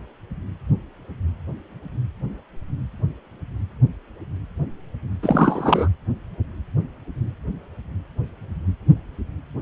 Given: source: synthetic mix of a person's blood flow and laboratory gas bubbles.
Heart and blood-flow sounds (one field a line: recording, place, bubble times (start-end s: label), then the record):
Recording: Doppler ultrasound of blood flow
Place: precordium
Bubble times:
5.23-5.88 s: bubbles
From the record:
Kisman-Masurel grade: 213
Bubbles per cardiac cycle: several, 3 to 8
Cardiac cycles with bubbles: 1 to 10%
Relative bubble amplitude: loud (0.450 to 0.775)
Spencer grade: 1 (occasional bubble signal discernible with the cardiac motion signal, with majority of cardiac periods free of bubbles)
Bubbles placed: anywhere in the cardiac cycle